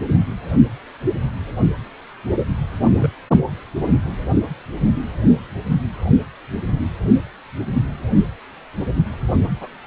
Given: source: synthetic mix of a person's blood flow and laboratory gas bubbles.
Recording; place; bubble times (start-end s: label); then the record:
Doppler ultrasound of blood flow; precordium
1.61-1.69 s: bubbles
3.00-3.10 s: bubbles
9.61-9.68 s: bubbles
From the record:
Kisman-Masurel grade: 121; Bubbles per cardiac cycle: 1 to 2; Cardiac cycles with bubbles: 10 to 50%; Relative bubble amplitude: barely perceptible (0.100 to 0.250); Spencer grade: 2 (many but less than half of the cardiac periods contain bubble signals, singularly or in groups); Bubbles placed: anywhere in the cardiac cycle